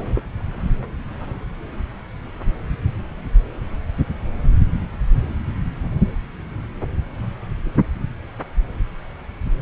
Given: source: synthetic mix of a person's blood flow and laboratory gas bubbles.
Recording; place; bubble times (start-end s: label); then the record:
Doppler ultrasound of blood flow; subclavian vein
no bubbles
From the record:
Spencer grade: 0 (complete lack of bubble signals)